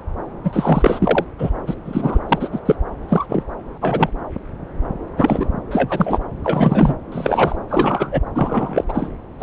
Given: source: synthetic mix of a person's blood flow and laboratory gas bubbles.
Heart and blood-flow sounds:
Doppler ultrasound of blood flow; subclavian vein
0.44-1.25 s: bubbles
1.39-1.50 s: bubbles
1.67-1.75 s: bubbles
1.85-2.19 s: bubbles
2.29-2.49 s: bubbles
2.52-2.60 s: bubbles
2.65-2.75 s: bubbles
3.08-3.26 s: bubbles
3.29-3.43 s: bubbles
3.81-4.09 s: bubbles
5.17-5.49 s: bubbles
5.71-6.21 s: bubbles
6.44-6.96 s: bubbles
7.12-7.55 s: bubbles
7.69-8.21 s: bubbles
8.35-8.84 s: bubbles
8.88-9.09 s: bubbles
9.39-9.43 s: bubbles
From the record:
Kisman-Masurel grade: 233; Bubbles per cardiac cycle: several, 3 to 8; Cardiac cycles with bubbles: 50 to 99%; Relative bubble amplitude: loud (0.450 to 0.775); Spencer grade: 3 (all of the cardiac periods contain showers or single bubble signals, but not dominating or overriding the cardiac motion signals); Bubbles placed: anywhere in the cardiac cycle

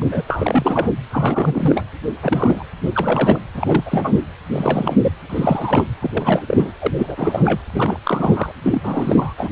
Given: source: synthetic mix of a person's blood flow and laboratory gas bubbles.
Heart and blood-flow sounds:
Doppler ultrasound of blood flow; precordium
0.00-0.23 s: bubbles
0.26-0.91 s: bubbles
1.10-1.84 s: bubbles
2.22-2.63 s: bubbles
2.83-3.40 s: bubbles
3.54-4.16 s: bubbles
4.52-5.12 s: bubbles
5.30-5.87 s: bubbles
6.01-6.11 s: bubbles
6.13-6.41 s: bubbles
6.47-6.72 s: bubbles
6.80-6.91 s: bubbles
6.97-7.61 s: bubbles
7.66-8.00 s: bubbles
8.04-8.52 s: bubbles
8.63-8.80 s: bubbles
8.83-9.33 s: bubbles
9.37-9.52 s: bubbles
From the record:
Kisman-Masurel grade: 342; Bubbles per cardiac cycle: rolling drumbeat, 9 or more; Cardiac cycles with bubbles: 100%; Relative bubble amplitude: moderate (0.250 to 0.450); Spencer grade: 3 (all of the cardiac periods contain showers or single bubble signals, but not dominating or overriding the cardiac motion signals); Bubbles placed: anywhere in the cardiac cycle

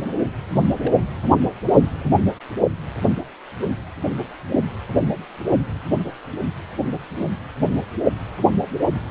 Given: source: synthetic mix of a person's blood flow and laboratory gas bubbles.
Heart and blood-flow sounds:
Doppler ultrasound of blood flow; precordium
0.78-0.94 s: bubbles
From the record:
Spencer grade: 1 (occasional bubble signal discernible with the cardiac motion signal, with majority of cardiac periods free of bubbles); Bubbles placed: anywhere in the cardiac cycle

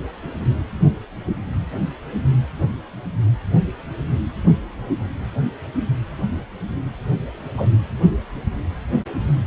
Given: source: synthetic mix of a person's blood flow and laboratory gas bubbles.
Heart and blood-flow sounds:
Doppler ultrasound of blood flow; precordium
7.56-7.67 s: bubbles
From the record:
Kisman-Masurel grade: 113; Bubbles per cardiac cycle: 1 to 2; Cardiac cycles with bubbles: 1 to 10%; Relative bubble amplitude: loud (0.450 to 0.775); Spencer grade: 1 (occasional bubble signal discernible with the cardiac motion signal, with majority of cardiac periods free of bubbles); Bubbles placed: anywhere in the cardiac cycle

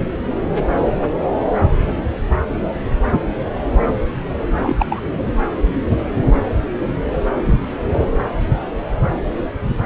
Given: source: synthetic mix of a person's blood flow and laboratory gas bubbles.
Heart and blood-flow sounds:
Doppler ultrasound of blood flow; subclavian vein
4.62-4.86 s: bubbles
4.90-5.03 s: bubbles
5.25-5.33 s: bubbles
From the record:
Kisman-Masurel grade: 213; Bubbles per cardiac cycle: several, 3 to 8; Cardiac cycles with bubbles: 1 to 10%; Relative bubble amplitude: loud (0.450 to 0.775); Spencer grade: 1 (occasional bubble signal discernible with the cardiac motion signal, with majority of cardiac periods free of bubbles); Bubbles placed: anywhere in the cardiac cycle

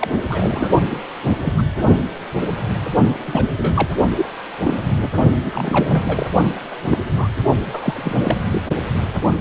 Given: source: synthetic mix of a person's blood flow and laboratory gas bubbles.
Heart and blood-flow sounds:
Doppler ultrasound of blood flow; precordium
0.00-0.08 s: bubbles
0.12-0.21 s: bubbles
0.29-0.76 s: bubbles
0.90-0.99 s: bubbles
1.41-1.54 s: bubbles
1.57-1.62 s: bubbles
3.24-3.45 s: bubbles
3.57-3.87 s: bubbles
4.17-4.27 s: bubbles
4.65-4.78 s: bubbles
4.98-5.08 s: bubbles
5.46-6.27 s: bubbles
6.71-6.75 s: bubbles
6.88-6.99 s: bubbles
7.18-7.28 s: bubbles
7.65-8.37 s: bubbles
8.51-8.61 s: bubbles
From the record:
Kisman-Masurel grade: 232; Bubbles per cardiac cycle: several, 3 to 8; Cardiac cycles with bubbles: 50 to 99%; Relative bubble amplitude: moderate (0.250 to 0.450); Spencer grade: 3 (all of the cardiac periods contain showers or single bubble signals, but not dominating or overriding the cardiac motion signals); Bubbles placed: only in the low amplitude regions of the cardiac cycle

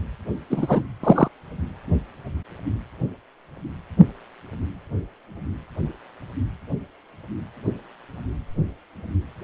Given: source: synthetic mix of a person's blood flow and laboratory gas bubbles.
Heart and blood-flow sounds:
Doppler ultrasound of blood flow; precordium
0.50-0.83 s: bubbles
1.03-1.28 s: bubbles
From the record:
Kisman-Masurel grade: 123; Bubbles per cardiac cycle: 1 to 2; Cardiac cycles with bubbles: 10 to 50%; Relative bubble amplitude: loud (0.450 to 0.775); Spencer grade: 2 (many but less than half of the cardiac periods contain bubble signals, singularly or in groups); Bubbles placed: anywhere in the cardiac cycle

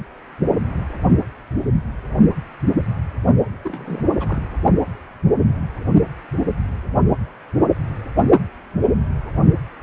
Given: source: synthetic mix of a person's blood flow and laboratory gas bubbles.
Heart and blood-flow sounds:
Doppler ultrasound of blood flow; precordium
3.63-4.10 s: bubbles
4.18-4.43 s: bubbles
From the record:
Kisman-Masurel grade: 221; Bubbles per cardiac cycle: several, 3 to 8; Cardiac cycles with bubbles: 10 to 50%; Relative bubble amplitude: barely perceptible (0.100 to 0.250); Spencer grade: 2 (many but less than half of the cardiac periods contain bubble signals, singularly or in groups); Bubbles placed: only in the low amplitude regions of the cardiac cycle

